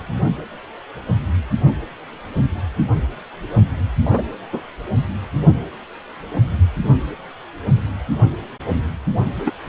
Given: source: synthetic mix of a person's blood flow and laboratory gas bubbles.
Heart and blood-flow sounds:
Doppler ultrasound of blood flow; precordium
4.05-4.22 s: bubbles
4.53-4.62 s: bubbles
9.46-9.51 s: bubbles
From the record:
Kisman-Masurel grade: 123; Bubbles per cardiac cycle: 1 to 2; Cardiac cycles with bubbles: 10 to 50%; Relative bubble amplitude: loud (0.450 to 0.775); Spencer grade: 2 (many but less than half of the cardiac periods contain bubble signals, singularly or in groups); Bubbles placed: anywhere in the cardiac cycle

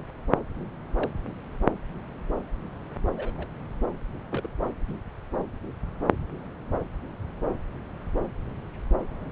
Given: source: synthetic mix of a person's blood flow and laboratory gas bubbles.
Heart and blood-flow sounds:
Doppler ultrasound of blood flow; subclavian vein
0.96-1.11 s: bubbles
3.17-3.47 s: bubbles
4.30-4.47 s: bubbles
4.88-4.94 s: bubbles
From the record:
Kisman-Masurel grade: 121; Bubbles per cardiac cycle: 1 to 2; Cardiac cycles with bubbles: 10 to 50%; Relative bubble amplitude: barely perceptible (0.100 to 0.250); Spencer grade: 2 (many but less than half of the cardiac periods contain bubble signals, singularly or in groups); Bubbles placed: anywhere in the cardiac cycle

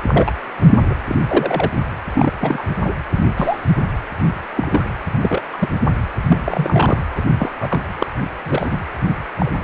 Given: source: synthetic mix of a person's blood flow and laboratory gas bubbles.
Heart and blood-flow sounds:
Doppler ultrasound of blood flow; precordium
0.07-0.32 s: bubbles
0.67-0.78 s: bubbles
0.90-0.95 s: bubbles
1.07-1.17 s: bubbles
1.25-1.72 s: bubbles
2.15-2.32 s: bubbles
2.39-2.77 s: bubbles
2.83-2.94 s: bubbles
3.12-3.23 s: bubbles
3.36-3.73 s: bubbles
4.57-4.84 s: bubbles
5.23-5.43 s: bubbles
5.53-5.78 s: bubbles
6.29-6.99 s: bubbles
7.16-7.22 s: bubbles
7.37-7.50 s: bubbles
7.59-7.81 s: bubbles
7.99-8.07 s: bubbles
8.45-8.78 s: bubbles
9.39-9.52 s: bubbles
From the record:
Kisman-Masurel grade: 242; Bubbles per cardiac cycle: several, 3 to 8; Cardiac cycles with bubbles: 100%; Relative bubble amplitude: moderate (0.250 to 0.450); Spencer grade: 3 (all of the cardiac periods contain showers or single bubble signals, but not dominating or overriding the cardiac motion signals); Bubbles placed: anywhere in the cardiac cycle

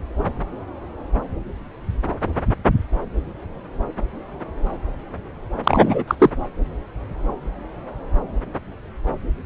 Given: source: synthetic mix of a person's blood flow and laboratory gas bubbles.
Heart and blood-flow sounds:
Doppler ultrasound of blood flow; subclavian vein
5.64-6.04 s: bubbles
6.07-6.15 s: bubbles
6.20-6.30 s: bubbles
From the record:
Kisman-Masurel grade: 213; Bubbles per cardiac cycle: several, 3 to 8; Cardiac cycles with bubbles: 1 to 10%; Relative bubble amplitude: loud (0.450 to 0.775); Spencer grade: 1 (occasional bubble signal discernible with the cardiac motion signal, with majority of cardiac periods free of bubbles); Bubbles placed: anywhere in the cardiac cycle

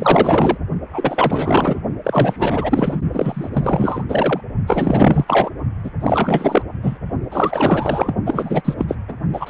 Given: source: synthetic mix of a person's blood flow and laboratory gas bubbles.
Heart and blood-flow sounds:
Doppler ultrasound of blood flow; precordium
0.00-0.57 s: bubbles
0.89-1.81 s: bubbles
2.04-2.98 s: bubbles
3.14-3.50 s: bubbles
3.53-4.04 s: bubbles
4.08-4.41 s: bubbles
4.67-5.50 s: bubbles
5.83-5.90 s: bubbles
6.00-6.62 s: bubbles
6.82-6.97 s: bubbles
7.31-8.14 s: bubbles
8.26-8.62 s: bubbles
8.64-8.74 s: bubbles
8.78-8.85 s: bubbles
8.88-8.96 s: bubbles
9.07-9.13 s: bubbles
9.33-9.50 s: bubbles
From the record:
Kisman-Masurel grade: 444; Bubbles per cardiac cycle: continuous sound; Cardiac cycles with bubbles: 100%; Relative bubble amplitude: maximal (0.775 to 0.999); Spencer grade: 4 (maximum detectable bubble signal sounding continuously throughout systole and diastole of every cardiac period, and overriding the amplitude of the normal cardiac signals); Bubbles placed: only in the low amplitude regions of the cardiac cycle

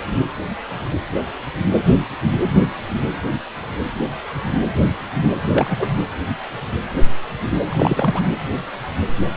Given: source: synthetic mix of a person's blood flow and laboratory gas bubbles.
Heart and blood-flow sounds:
Doppler ultrasound of blood flow; precordium
5.52-5.89 s: bubbles
7.69-8.28 s: bubbles
From the record:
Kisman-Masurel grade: 213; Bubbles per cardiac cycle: several, 3 to 8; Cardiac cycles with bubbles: 1 to 10%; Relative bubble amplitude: loud (0.450 to 0.775); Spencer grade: 1 (occasional bubble signal discernible with the cardiac motion signal, with majority of cardiac periods free of bubbles); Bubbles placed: anywhere in the cardiac cycle

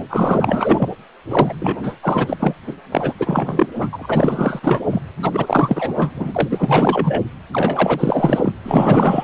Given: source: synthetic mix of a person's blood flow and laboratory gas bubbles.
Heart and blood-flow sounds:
Doppler ultrasound of blood flow; precordium
0.09-0.88 s: bubbles
1.29-1.54 s: bubbles
1.59-1.77 s: bubbles
1.83-1.95 s: bubbles
2.02-2.54 s: bubbles
2.67-2.73 s: bubbles
2.92-3.15 s: bubbles
3.18-3.67 s: bubbles
3.76-3.90 s: bubbles
3.92-4.60 s: bubbles
4.62-4.81 s: bubbles
4.91-5.02 s: bubbles
5.22-5.94 s: bubbles
5.97-6.12 s: bubbles
6.15-7.22 s: bubbles
7.53-8.52 s: bubbles
8.63-9.24 s: bubbles
From the record:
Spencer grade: 4 (maximum detectable bubble signal sounding continuously throughout systole and diastole of every cardiac period, and overriding the amplitude of the normal cardiac signals); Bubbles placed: anywhere in the cardiac cycle

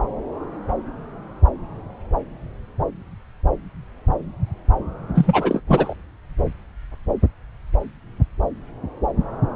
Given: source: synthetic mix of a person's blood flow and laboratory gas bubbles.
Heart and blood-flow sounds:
Doppler ultrasound of blood flow; subclavian vein
5.14-5.62 s: bubbles
5.67-5.93 s: bubbles
From the record:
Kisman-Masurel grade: 213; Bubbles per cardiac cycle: several, 3 to 8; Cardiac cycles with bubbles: 1 to 10%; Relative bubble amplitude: loud (0.450 to 0.775); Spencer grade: 1 (occasional bubble signal discernible with the cardiac motion signal, with majority of cardiac periods free of bubbles); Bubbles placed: anywhere in the cardiac cycle

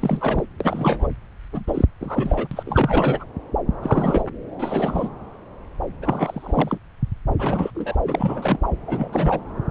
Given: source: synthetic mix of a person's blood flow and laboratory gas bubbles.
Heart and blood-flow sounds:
Doppler ultrasound of blood flow; subclavian vein
0.00-0.45 s: bubbles
0.60-1.07 s: bubbles
1.52-1.65 s: bubbles
1.67-1.85 s: bubbles
2.00-2.47 s: bubbles
2.51-3.25 s: bubbles
3.82-4.22 s: bubbles
4.59-5.09 s: bubbles
6.01-6.78 s: bubbles
7.38-7.70 s: bubbles
7.74-7.96 s: bubbles
8.05-8.59 s: bubbles
8.87-9.08 s: bubbles
9.12-9.38 s: bubbles
From the record:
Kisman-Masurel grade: 332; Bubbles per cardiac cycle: rolling drumbeat, 9 or more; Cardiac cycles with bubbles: 50 to 99%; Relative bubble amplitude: moderate (0.250 to 0.450); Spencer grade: 3 (all of the cardiac periods contain showers or single bubble signals, but not dominating or overriding the cardiac motion signals); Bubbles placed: anywhere in the cardiac cycle

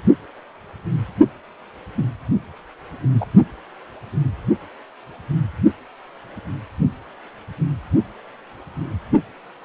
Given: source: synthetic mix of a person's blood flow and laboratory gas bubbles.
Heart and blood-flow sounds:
Doppler ultrasound of blood flow; precordium
1.97-2.04 s: bubbles
3.21-3.26 s: bubbles
From the record:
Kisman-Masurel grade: 113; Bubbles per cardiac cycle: 1 to 2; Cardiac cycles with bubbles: 1 to 10%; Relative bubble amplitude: loud (0.450 to 0.775); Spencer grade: 1 (occasional bubble signal discernible with the cardiac motion signal, with majority of cardiac periods free of bubbles); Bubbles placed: only in the low amplitude regions of the cardiac cycle

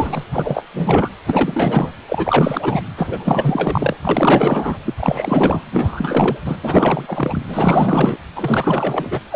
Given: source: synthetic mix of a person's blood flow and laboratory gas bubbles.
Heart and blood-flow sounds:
Doppler ultrasound of blood flow; precordium
0.00-0.23 s: bubbles
0.32-0.64 s: bubbles
0.74-1.11 s: bubbles
1.26-1.92 s: bubbles
2.08-2.81 s: bubbles
2.97-3.96 s: bubbles
4.04-4.78 s: bubbles
4.84-4.94 s: bubbles
4.96-5.65 s: bubbles
5.71-6.37 s: bubbles
6.45-6.58 s: bubbles
6.63-7.42 s: bubbles
7.47-8.18 s: bubbles
8.36-9.20 s: bubbles
9.30-9.36 s: bubbles
From the record:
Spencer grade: 4 (maximum detectable bubble signal sounding continuously throughout systole and diastole of every cardiac period, and overriding the amplitude of the normal cardiac signals); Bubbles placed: anywhere in the cardiac cycle

